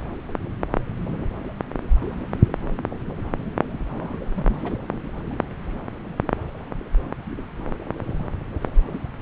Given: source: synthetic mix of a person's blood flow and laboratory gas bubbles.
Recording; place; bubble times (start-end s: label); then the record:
Doppler ultrasound of blood flow; subclavian vein
3.73-4.17 s: bubbles
4.34-4.77 s: bubbles
From the record:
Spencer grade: 1 (occasional bubble signal discernible with the cardiac motion signal, with majority of cardiac periods free of bubbles); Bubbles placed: anywhere in the cardiac cycle